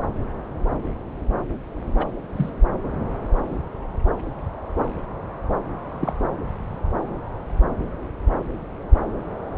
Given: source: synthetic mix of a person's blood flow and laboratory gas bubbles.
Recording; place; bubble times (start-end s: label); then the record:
Doppler ultrasound of blood flow; subclavian vein
1.99-2.06 s: bubbles
2.36-2.50 s: bubbles
5.79-6.24 s: bubbles
From the record:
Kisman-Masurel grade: 111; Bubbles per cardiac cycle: 1 to 2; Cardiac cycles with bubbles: 1 to 10%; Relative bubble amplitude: barely perceptible (0.100 to 0.250); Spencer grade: 1 (occasional bubble signal discernible with the cardiac motion signal, with majority of cardiac periods free of bubbles); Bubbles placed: anywhere in the cardiac cycle